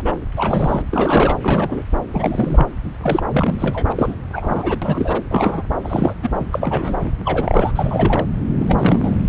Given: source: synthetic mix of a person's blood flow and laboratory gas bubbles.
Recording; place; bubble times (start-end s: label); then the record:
Doppler ultrasound of blood flow; subclavian vein
0.00-0.14 s: bubbles
0.35-0.82 s: bubbles
0.91-1.37 s: bubbles
1.42-1.84 s: bubbles
2.10-2.68 s: bubbles
3.03-3.23 s: bubbles
3.29-3.92 s: bubbles
3.96-4.15 s: bubbles
4.33-4.78 s: bubbles
4.82-5.21 s: bubbles
5.30-5.62 s: bubbles
5.83-6.13 s: bubbles
6.23-6.46 s: bubbles
6.52-7.12 s: bubbles
7.25-7.72 s: bubbles
7.76-8.26 s: bubbles
8.59-9.25 s: bubbles
From the record:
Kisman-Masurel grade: 342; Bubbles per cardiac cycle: rolling drumbeat, 9 or more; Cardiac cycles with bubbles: 100%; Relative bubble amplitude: moderate (0.250 to 0.450); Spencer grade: 3 (all of the cardiac periods contain showers or single bubble signals, but not dominating or overriding the cardiac motion signals); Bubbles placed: anywhere in the cardiac cycle